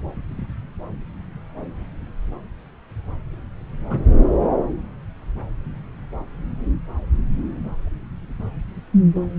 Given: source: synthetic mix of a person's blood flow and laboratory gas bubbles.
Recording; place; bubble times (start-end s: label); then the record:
Doppler ultrasound of blood flow; subclavian vein
3.90-3.99 s: bubbles
From the record:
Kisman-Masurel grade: 112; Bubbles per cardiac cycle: 1 to 2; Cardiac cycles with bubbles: 1 to 10%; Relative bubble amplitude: moderate (0.250 to 0.450); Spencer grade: 1 (occasional bubble signal discernible with the cardiac motion signal, with majority of cardiac periods free of bubbles); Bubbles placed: anywhere in the cardiac cycle